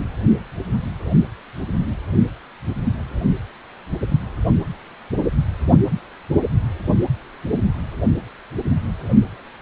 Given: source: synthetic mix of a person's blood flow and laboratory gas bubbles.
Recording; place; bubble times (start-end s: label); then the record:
Doppler ultrasound of blood flow; precordium
no bubbles
From the record:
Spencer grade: 0 (complete lack of bubble signals)